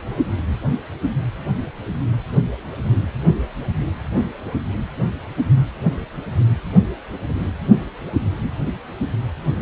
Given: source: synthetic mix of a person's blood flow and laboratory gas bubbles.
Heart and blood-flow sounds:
Doppler ultrasound of blood flow; precordium
no bubbles
From the record:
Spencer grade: 0 (complete lack of bubble signals)

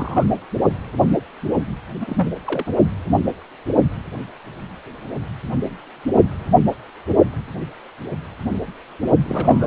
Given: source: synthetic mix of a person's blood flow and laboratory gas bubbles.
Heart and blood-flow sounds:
Doppler ultrasound of blood flow; precordium
0.00-0.24 s: bubbles
2.00-2.27 s: bubbles
2.46-2.64 s: bubbles
2.67-2.72 s: bubbles
9.22-9.67 s: bubbles
From the record:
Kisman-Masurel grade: 221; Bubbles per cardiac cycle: several, 3 to 8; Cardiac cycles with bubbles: 10 to 50%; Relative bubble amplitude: barely perceptible (0.100 to 0.250); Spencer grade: 2 (many but less than half of the cardiac periods contain bubble signals, singularly or in groups); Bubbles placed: only in the low amplitude regions of the cardiac cycle

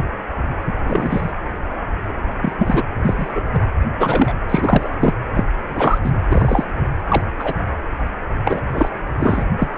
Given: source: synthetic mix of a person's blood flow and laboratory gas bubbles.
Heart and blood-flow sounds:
Doppler ultrasound of blood flow; precordium
0.66-0.73 s: bubbles
0.85-1.33 s: bubbles
2.42-2.52 s: bubbles
2.58-2.84 s: bubbles
3.02-3.42 s: bubbles
3.52-3.62 s: bubbles
4.00-4.33 s: bubbles
4.49-4.90 s: bubbles
5.00-5.13 s: bubbles
5.34-5.44 s: bubbles
5.76-5.98 s: bubbles
6.04-6.11 s: bubbles
6.29-6.64 s: bubbles
7.08-7.22 s: bubbles
7.38-7.55 s: bubbles
8.45-8.62 s: bubbles
8.74-8.92 s: bubbles
9.20-9.45 s: bubbles
9.59-9.69 s: bubbles
From the record:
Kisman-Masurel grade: 233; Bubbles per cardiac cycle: several, 3 to 8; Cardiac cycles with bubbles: 50 to 99%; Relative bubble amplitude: loud (0.450 to 0.775); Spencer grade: 3 (all of the cardiac periods contain showers or single bubble signals, but not dominating or overriding the cardiac motion signals); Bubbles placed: anywhere in the cardiac cycle

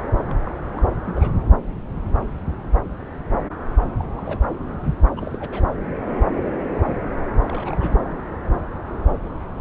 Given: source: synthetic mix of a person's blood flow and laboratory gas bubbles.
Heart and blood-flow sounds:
Doppler ultrasound of blood flow; subclavian vein
0.27-0.36 s: bubbles
0.45-0.54 s: bubbles
0.74-0.85 s: bubbles
1.06-1.32 s: bubbles
3.98-4.04 s: bubbles
4.17-4.39 s: bubbles
5.17-5.63 s: bubbles
7.47-7.96 s: bubbles
From the record:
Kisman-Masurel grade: 221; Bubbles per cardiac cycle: several, 3 to 8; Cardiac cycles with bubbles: 10 to 50%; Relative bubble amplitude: barely perceptible (0.100 to 0.250); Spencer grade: 2 (many but less than half of the cardiac periods contain bubble signals, singularly or in groups); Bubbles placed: anywhere in the cardiac cycle

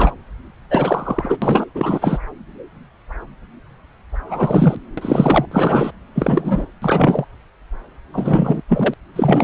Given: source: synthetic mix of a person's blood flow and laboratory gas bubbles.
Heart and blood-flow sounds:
Doppler ultrasound of blood flow; subclavian vein
0.00-0.12 s: bubbles
0.70-1.37 s: bubbles
1.42-1.66 s: bubbles
1.74-2.18 s: bubbles
4.27-4.76 s: bubbles
4.97-5.45 s: bubbles
5.51-5.91 s: bubbles
6.15-6.66 s: bubbles
6.82-7.25 s: bubbles
8.12-8.62 s: bubbles
8.69-8.95 s: bubbles
9.13-9.44 s: bubbles
From the record:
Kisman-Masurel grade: 333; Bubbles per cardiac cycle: rolling drumbeat, 9 or more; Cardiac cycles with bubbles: 50 to 99%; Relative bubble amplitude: loud (0.450 to 0.775); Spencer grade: 3 (all of the cardiac periods contain showers or single bubble signals, but not dominating or overriding the cardiac motion signals); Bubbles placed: anywhere in the cardiac cycle

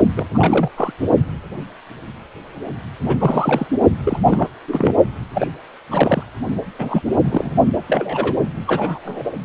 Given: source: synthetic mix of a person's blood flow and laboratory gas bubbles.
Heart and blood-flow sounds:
Doppler ultrasound of blood flow; precordium
0.16-0.26 s: bubbles
0.34-0.69 s: bubbles
0.77-0.92 s: bubbles
3.01-3.67 s: bubbles
4.04-4.18 s: bubbles
4.25-4.48 s: bubbles
4.67-4.95 s: bubbles
5.33-5.47 s: bubbles
5.91-6.23 s: bubbles
6.79-7.01 s: bubbles
7.24-7.51 s: bubbles
7.73-7.83 s: bubbles
7.87-8.37 s: bubbles
8.67-9.32 s: bubbles
From the record:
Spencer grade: 3 (all of the cardiac periods contain showers or single bubble signals, but not dominating or overriding the cardiac motion signals); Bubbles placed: only in the low amplitude regions of the cardiac cycle

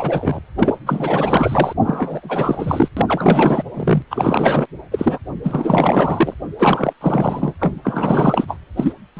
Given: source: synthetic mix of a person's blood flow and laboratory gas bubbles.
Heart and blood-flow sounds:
Doppler ultrasound of blood flow; precordium
0.00-0.40 s: bubbles
0.57-0.78 s: bubbles
0.86-1.73 s: bubbles
1.83-2.88 s: bubbles
2.96-3.62 s: bubbles
3.74-4.02 s: bubbles
4.10-4.67 s: bubbles
4.92-5.18 s: bubbles
5.43-6.34 s: bubbles
6.58-6.93 s: bubbles
7.00-7.54 s: bubbles
7.59-7.81 s: bubbles
7.83-8.58 s: bubbles
8.77-8.93 s: bubbles
9.17-9.19 s: bubbles
From the record:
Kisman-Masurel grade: 444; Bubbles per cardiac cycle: continuous sound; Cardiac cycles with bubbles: 100%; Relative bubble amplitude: maximal (0.775 to 0.999); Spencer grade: 4 (maximum detectable bubble signal sounding continuously throughout systole and diastole of every cardiac period, and overriding the amplitude of the normal cardiac signals); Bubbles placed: anywhere in the cardiac cycle

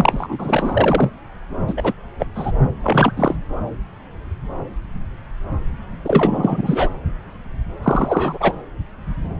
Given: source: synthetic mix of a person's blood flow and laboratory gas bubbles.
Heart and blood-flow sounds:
Doppler ultrasound of blood flow; subclavian vein
0.00-1.12 s: bubbles
1.67-1.74 s: bubbles
1.76-1.93 s: bubbles
2.19-2.26 s: bubbles
2.35-2.51 s: bubbles
2.83-3.12 s: bubbles
3.17-3.36 s: bubbles
6.04-6.89 s: bubbles
7.83-8.38 s: bubbles
8.40-8.52 s: bubbles
From the record:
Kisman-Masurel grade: 223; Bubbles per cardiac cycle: several, 3 to 8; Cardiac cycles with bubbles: 10 to 50%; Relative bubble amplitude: loud (0.450 to 0.775); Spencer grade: 2 (many but less than half of the cardiac periods contain bubble signals, singularly or in groups); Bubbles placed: anywhere in the cardiac cycle

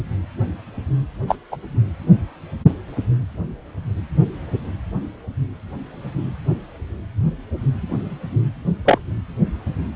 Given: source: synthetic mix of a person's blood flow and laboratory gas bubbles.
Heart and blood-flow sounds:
Doppler ultrasound of blood flow; precordium
1.27-1.35 s: bubbles
1.51-1.56 s: bubbles
8.85-8.98 s: bubbles
From the record:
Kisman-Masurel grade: 123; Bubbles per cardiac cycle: 1 to 2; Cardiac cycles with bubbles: 10 to 50%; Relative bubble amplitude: loud (0.450 to 0.775); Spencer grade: 2 (many but less than half of the cardiac periods contain bubble signals, singularly or in groups); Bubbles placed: anywhere in the cardiac cycle

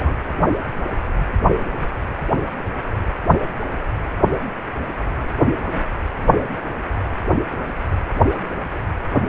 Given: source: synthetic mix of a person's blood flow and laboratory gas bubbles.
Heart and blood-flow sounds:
Doppler ultrasound of blood flow; precordium
0.00-0.14 s: bubbles
From the record:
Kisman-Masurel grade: 111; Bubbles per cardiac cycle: 1 to 2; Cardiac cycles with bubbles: 1 to 10%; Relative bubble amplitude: barely perceptible (0.100 to 0.250); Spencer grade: 1 (occasional bubble signal discernible with the cardiac motion signal, with majority of cardiac periods free of bubbles); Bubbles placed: anywhere in the cardiac cycle

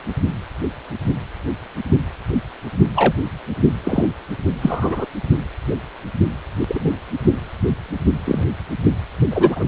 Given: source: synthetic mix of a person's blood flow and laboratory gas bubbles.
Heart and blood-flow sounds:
Doppler ultrasound of blood flow; precordium
2.96-3.15 s: bubbles
3.84-4.07 s: bubbles
4.62-5.06 s: bubbles
5.71-5.75 s: bubbles
6.68-6.91 s: bubbles
8.24-8.43 s: bubbles
9.30-9.65 s: bubbles
From the record:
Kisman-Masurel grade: 123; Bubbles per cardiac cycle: 1 to 2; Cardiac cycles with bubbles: 10 to 50%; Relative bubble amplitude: loud (0.450 to 0.775); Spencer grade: 2 (many but less than half of the cardiac periods contain bubble signals, singularly or in groups); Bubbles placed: only in the low amplitude regions of the cardiac cycle

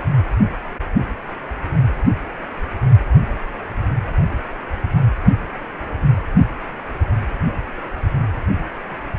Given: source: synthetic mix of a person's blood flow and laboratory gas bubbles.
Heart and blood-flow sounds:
Doppler ultrasound of blood flow; precordium
2.05-2.11 s: bubbles
6.02-6.07 s: bubbles
6.15-6.22 s: bubbles
From the record:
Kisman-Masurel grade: 121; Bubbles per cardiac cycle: 1 to 2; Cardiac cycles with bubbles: 10 to 50%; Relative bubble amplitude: barely perceptible (0.100 to 0.250); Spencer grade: 2 (many but less than half of the cardiac periods contain bubble signals, singularly or in groups); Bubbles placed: only in the low amplitude regions of the cardiac cycle

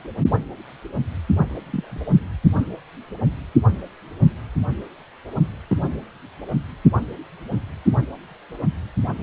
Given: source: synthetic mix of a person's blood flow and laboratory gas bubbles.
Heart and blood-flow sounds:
Doppler ultrasound of blood flow; precordium
1.63-2.02 s: bubbles
5.67-5.77 s: bubbles
From the record:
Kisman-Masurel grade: 121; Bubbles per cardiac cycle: 1 to 2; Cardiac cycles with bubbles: 10 to 50%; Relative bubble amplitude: barely perceptible (0.100 to 0.250); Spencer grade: 2 (many but less than half of the cardiac periods contain bubble signals, singularly or in groups); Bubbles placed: only in the low amplitude regions of the cardiac cycle

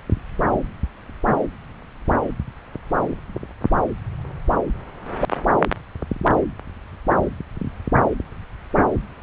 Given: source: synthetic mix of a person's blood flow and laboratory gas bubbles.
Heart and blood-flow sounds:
Doppler ultrasound of blood flow; subclavian vein
no bubbles
From the record:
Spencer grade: 0 (complete lack of bubble signals)

